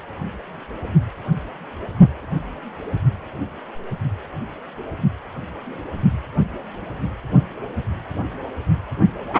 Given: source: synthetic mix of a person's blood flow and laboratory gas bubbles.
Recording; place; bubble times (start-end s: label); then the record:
Doppler ultrasound of blood flow; precordium
no bubbles
From the record:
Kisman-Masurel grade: 000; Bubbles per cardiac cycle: 0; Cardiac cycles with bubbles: 0%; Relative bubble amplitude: no bubbles discernible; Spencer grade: 0 (complete lack of bubble signals)